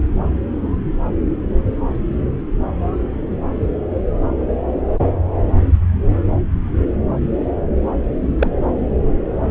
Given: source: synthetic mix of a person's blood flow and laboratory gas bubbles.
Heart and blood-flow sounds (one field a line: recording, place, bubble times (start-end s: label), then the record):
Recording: Doppler ultrasound of blood flow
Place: subclavian vein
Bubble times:
8.39-8.51 s: bubbles
From the record:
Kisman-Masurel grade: 113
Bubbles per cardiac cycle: 1 to 2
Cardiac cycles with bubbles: 1 to 10%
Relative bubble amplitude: loud (0.450 to 0.775)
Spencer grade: 1 (occasional bubble signal discernible with the cardiac motion signal, with majority of cardiac periods free of bubbles)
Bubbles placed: anywhere in the cardiac cycle